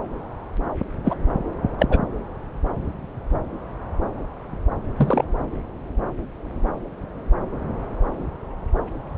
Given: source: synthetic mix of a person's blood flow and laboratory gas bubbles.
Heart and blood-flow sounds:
Doppler ultrasound of blood flow; subclavian vein
1.04-1.15 s: bubbles
1.79-1.86 s: bubbles
1.90-2.00 s: bubbles
4.96-5.25 s: bubbles
From the record:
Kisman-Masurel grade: 123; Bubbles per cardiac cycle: 1 to 2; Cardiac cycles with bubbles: 10 to 50%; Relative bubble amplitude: loud (0.450 to 0.775); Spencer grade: 2 (many but less than half of the cardiac periods contain bubble signals, singularly or in groups); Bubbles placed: anywhere in the cardiac cycle

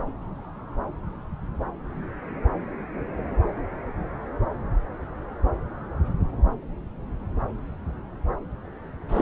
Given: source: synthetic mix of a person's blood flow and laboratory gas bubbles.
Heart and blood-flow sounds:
Doppler ultrasound of blood flow; subclavian vein
9.09-9.22 s: bubbles
From the record:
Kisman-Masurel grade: 211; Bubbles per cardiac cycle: several, 3 to 8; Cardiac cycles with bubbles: 1 to 10%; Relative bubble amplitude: barely perceptible (0.100 to 0.250); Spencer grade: 1 (occasional bubble signal discernible with the cardiac motion signal, with majority of cardiac periods free of bubbles); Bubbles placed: anywhere in the cardiac cycle

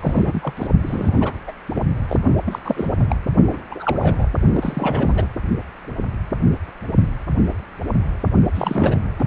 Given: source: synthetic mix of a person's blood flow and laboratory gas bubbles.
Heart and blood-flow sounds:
Doppler ultrasound of blood flow; precordium
0.01-0.53 s: bubbles
0.56-0.67 s: bubbles
0.82-1.31 s: bubbles
1.47-1.51 s: bubbles
1.75-1.83 s: bubbles
2.08-2.17 s: bubbles
2.45-2.59 s: bubbles
2.64-3.05 s: bubbles
3.10-3.16 s: bubbles
3.50-3.58 s: bubbles
3.71-4.27 s: bubbles
4.53-5.27 s: bubbles
8.54-8.97 s: bubbles
9.18-9.24 s: bubbles
From the record:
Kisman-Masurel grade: 332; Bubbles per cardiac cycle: rolling drumbeat, 9 or more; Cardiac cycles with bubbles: 50 to 99%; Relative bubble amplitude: moderate (0.250 to 0.450); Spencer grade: 3 (all of the cardiac periods contain showers or single bubble signals, but not dominating or overriding the cardiac motion signals); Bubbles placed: only in the low amplitude regions of the cardiac cycle

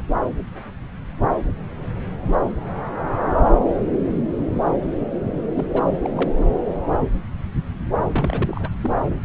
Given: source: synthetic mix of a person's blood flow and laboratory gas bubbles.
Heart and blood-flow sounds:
Doppler ultrasound of blood flow; subclavian vein
0.00-0.02 s: bubbles
5.55-5.65 s: bubbles
5.72-5.92 s: bubbles
6.01-6.30 s: bubbles
8.07-8.70 s: bubbles
8.83-8.92 s: bubbles
From the record:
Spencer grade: 2 (many but less than half of the cardiac periods contain bubble signals, singularly or in groups); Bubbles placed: anywhere in the cardiac cycle

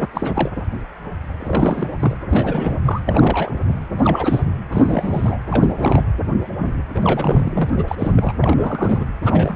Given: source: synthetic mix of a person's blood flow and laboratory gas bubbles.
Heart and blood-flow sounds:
Doppler ultrasound of blood flow; precordium
0.00-0.07 s: bubbles
0.13-0.51 s: bubbles
1.40-1.88 s: bubbles
2.00-2.17 s: bubbles
2.30-2.80 s: bubbles
2.84-3.01 s: bubbles
3.06-3.52 s: bubbles
3.98-4.43 s: bubbles
4.72-5.39 s: bubbles
5.50-6.03 s: bubbles
6.59-6.79 s: bubbles
6.95-7.70 s: bubbles
7.76-7.85 s: bubbles
7.88-8.33 s: bubbles
8.41-9.05 s: bubbles
9.22-9.56 s: bubbles
From the record:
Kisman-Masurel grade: 332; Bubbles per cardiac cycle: rolling drumbeat, 9 or more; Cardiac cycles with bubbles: 50 to 99%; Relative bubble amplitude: moderate (0.250 to 0.450); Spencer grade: 3 (all of the cardiac periods contain showers or single bubble signals, but not dominating or overriding the cardiac motion signals); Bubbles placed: anywhere in the cardiac cycle

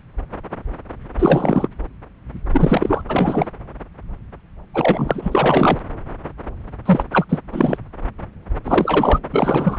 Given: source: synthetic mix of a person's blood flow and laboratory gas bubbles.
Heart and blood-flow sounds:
Doppler ultrasound of blood flow; subclavian vein
1.19-1.68 s: bubbles
2.53-3.03 s: bubbles
3.09-3.46 s: bubbles
4.74-5.79 s: bubbles
6.86-7.04 s: bubbles
7.12-7.25 s: bubbles
7.29-7.38 s: bubbles
7.52-7.77 s: bubbles
8.64-9.19 s: bubbles
9.31-9.78 s: bubbles
From the record:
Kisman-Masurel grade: 333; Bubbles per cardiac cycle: rolling drumbeat, 9 or more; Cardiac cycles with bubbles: 50 to 99%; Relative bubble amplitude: loud (0.450 to 0.775); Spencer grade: 3 (all of the cardiac periods contain showers or single bubble signals, but not dominating or overriding the cardiac motion signals); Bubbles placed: anywhere in the cardiac cycle

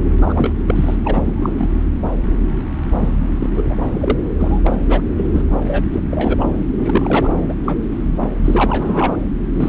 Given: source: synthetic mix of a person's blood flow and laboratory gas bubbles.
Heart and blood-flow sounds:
Doppler ultrasound of blood flow; subclavian vein
0.21-0.53 s: bubbles
0.66-0.96 s: bubbles
1.04-1.54 s: bubbles
1.58-1.70 s: bubbles
2.85-3.12 s: bubbles
3.39-3.50 s: bubbles
3.56-3.63 s: bubbles
3.67-3.77 s: bubbles
3.86-4.19 s: bubbles
4.40-4.61 s: bubbles
4.66-4.79 s: bubbles
4.85-5.01 s: bubbles
5.17-5.42 s: bubbles
5.67-5.85 s: bubbles
5.93-6.00 s: bubbles
6.10-6.56 s: bubbles
6.74-7.30 s: bubbles
7.49-7.54 s: bubbles
7.65-7.76 s: bubbles
8.15-8.28 s: bubbles
8.44-9.18 s: bubbles
9.52-9.69 s: bubbles
From the record:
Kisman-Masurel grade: 243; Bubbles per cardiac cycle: several, 3 to 8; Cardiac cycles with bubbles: 100%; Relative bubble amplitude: loud (0.450 to 0.775); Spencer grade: 3 (all of the cardiac periods contain showers or single bubble signals, but not dominating or overriding the cardiac motion signals); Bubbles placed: anywhere in the cardiac cycle

